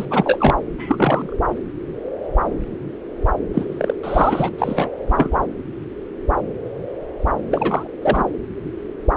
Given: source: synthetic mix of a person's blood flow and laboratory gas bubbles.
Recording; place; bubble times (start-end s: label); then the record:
Doppler ultrasound of blood flow; subclavian vein
0.00-0.05 s: bubbles
0.10-0.57 s: bubbles
0.78-1.33 s: bubbles
3.53-3.96 s: bubbles
4.03-4.52 s: bubbles
4.58-4.89 s: bubbles
5.07-5.38 s: bubbles
7.51-7.87 s: bubbles
8.02-8.23 s: bubbles
From the record:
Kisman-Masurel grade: 232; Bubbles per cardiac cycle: several, 3 to 8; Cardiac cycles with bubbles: 50 to 99%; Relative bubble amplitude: moderate (0.250 to 0.450); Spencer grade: 3 (all of the cardiac periods contain showers or single bubble signals, but not dominating or overriding the cardiac motion signals); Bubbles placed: anywhere in the cardiac cycle